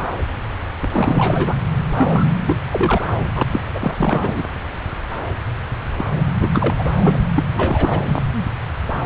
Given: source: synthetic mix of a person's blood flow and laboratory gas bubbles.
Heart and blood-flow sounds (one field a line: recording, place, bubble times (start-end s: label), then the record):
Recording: Doppler ultrasound of blood flow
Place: subclavian vein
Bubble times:
0.81-1.55 s: bubbles
1.97-2.26 s: bubbles
2.46-2.59 s: bubbles
2.71-3.03 s: bubbles
3.15-3.31 s: bubbles
3.35-3.42 s: bubbles
3.52-3.60 s: bubbles
3.74-4.43 s: bubbles
5.97-6.05 s: bubbles
6.14-6.24 s: bubbles
6.41-6.50 s: bubbles
6.53-6.75 s: bubbles
6.79-6.92 s: bubbles
7.04-7.21 s: bubbles
7.34-7.43 s: bubbles
7.54-8.02 s: bubbles
8.05-8.21 s: bubbles
From the record:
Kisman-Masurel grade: 333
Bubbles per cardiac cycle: rolling drumbeat, 9 or more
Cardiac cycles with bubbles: 50 to 99%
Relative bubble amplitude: loud (0.450 to 0.775)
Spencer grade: 3 (all of the cardiac periods contain showers or single bubble signals, but not dominating or overriding the cardiac motion signals)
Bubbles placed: anywhere in the cardiac cycle